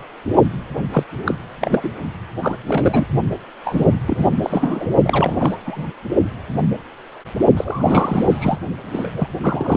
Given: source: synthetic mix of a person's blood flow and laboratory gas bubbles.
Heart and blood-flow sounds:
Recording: Doppler ultrasound of blood flow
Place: precordium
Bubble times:
0.92-1.03 s: bubbles
1.25-1.34 s: bubbles
1.61-1.93 s: bubbles
2.42-2.56 s: bubbles
2.67-3.06 s: bubbles
3.64-3.87 s: bubbles
4.07-4.29 s: bubbles
4.42-4.87 s: bubbles
5.04-5.58 s: bubbles
5.66-5.87 s: bubbles
7.57-8.59 s: bubbles
8.92-9.13 s: bubbles
9.16-9.27 s: bubbles
9.41-9.77 s: bubbles
From the record:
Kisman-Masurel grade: 332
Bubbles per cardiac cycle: rolling drumbeat, 9 or more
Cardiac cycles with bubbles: 50 to 99%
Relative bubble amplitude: moderate (0.250 to 0.450)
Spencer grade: 3 (all of the cardiac periods contain showers or single bubble signals, but not dominating or overriding the cardiac motion signals)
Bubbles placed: only in the low amplitude regions of the cardiac cycle

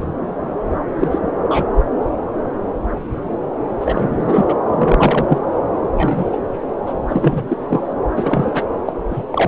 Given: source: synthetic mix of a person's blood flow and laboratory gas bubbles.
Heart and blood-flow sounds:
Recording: Doppler ultrasound of blood flow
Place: subclavian vein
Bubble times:
0.99-1.19 s: bubbles
1.44-1.66 s: bubbles
3.80-4.55 s: bubbles
4.68-5.26 s: bubbles
5.29-5.38 s: bubbles
5.84-6.38 s: bubbles
6.86-6.93 s: bubbles
7.08-7.94 s: bubbles
8.16-8.52 s: bubbles
8.54-8.63 s: bubbles
8.85-8.93 s: bubbles
9.10-9.22 s: bubbles
9.32-9.48 s: bubbles
From the record:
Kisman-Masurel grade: 233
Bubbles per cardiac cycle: several, 3 to 8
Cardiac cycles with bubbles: 50 to 99%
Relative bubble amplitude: loud (0.450 to 0.775)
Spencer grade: 3 (all of the cardiac periods contain showers or single bubble signals, but not dominating or overriding the cardiac motion signals)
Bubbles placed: anywhere in the cardiac cycle

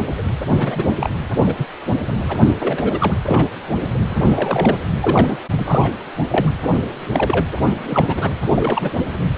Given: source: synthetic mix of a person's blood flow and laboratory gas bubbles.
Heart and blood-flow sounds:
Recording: Doppler ultrasound of blood flow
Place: precordium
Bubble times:
0.00-0.03 s: bubbles
0.17-0.22 s: bubbles
0.56-0.97 s: bubbles
0.99-1.10 s: bubbles
1.40-1.54 s: bubbles
1.58-1.66 s: bubbles
2.29-2.44 s: bubbles
2.60-3.14 s: bubbles
3.26-3.48 s: bubbles
4.09-4.76 s: bubbles
5.01-5.42 s: bubbles
5.50-5.91 s: bubbles
6.30-6.49 s: bubbles
7.13-7.45 s: bubbles
7.74-8.30 s: bubbles
8.55-8.97 s: bubbles
9.36-9.38 s: bubbles
From the record:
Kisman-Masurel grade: 242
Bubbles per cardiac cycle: several, 3 to 8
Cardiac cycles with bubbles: 100%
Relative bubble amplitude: moderate (0.250 to 0.450)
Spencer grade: 3 (all of the cardiac periods contain showers or single bubble signals, but not dominating or overriding the cardiac motion signals)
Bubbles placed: anywhere in the cardiac cycle

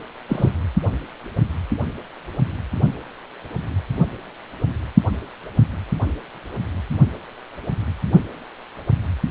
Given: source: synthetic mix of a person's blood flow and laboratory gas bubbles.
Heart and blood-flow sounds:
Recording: Doppler ultrasound of blood flow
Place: precordium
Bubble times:
0.28-0.51 s: bubbles
From the record:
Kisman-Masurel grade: 112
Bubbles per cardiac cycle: 1 to 2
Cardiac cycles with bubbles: 1 to 10%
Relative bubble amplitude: moderate (0.250 to 0.450)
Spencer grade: 1 (occasional bubble signal discernible with the cardiac motion signal, with majority of cardiac periods free of bubbles)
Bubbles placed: only in the low amplitude regions of the cardiac cycle

